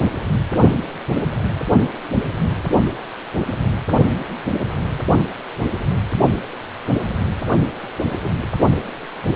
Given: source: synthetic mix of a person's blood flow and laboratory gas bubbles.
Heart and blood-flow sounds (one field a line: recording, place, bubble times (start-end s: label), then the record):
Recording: Doppler ultrasound of blood flow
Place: precordium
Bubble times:
8.24-8.29 s: bubbles
8.40-8.48 s: bubbles
From the record:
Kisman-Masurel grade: 121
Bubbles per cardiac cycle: 1 to 2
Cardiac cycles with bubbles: 10 to 50%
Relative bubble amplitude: barely perceptible (0.100 to 0.250)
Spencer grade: 2 (many but less than half of the cardiac periods contain bubble signals, singularly or in groups)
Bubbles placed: only in the low amplitude regions of the cardiac cycle